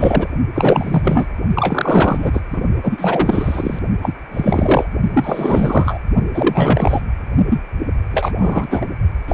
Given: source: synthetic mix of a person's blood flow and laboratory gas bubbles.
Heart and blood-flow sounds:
Doppler ultrasound of blood flow; precordium
0.00-0.29 s: bubbles
0.54-1.27 s: bubbles
1.55-2.41 s: bubbles
2.52-2.61 s: bubbles
2.82-3.79 s: bubbles
4.02-4.13 s: bubbles
4.31-4.89 s: bubbles
5.13-6.02 s: bubbles
6.33-7.02 s: bubbles
7.50-7.59 s: bubbles
8.12-8.32 s: bubbles
8.38-8.86 s: bubbles
9.28-9.34 s: bubbles
From the record:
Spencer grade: 4 (maximum detectable bubble signal sounding continuously throughout systole and diastole of every cardiac period, and overriding the amplitude of the normal cardiac signals); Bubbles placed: only in the low amplitude regions of the cardiac cycle

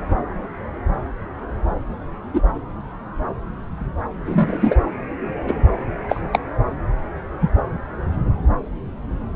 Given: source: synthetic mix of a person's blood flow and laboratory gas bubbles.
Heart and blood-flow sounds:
Doppler ultrasound of blood flow; subclavian vein
2.33-2.41 s: bubbles
4.25-4.76 s: bubbles
5.47-5.55 s: bubbles
6.09-6.21 s: bubbles
6.32-6.39 s: bubbles
7.40-7.50 s: bubbles
From the record:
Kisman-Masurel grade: 123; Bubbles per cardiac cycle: 1 to 2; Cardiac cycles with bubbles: 10 to 50%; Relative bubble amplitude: loud (0.450 to 0.775); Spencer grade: 2 (many but less than half of the cardiac periods contain bubble signals, singularly or in groups); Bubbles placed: anywhere in the cardiac cycle

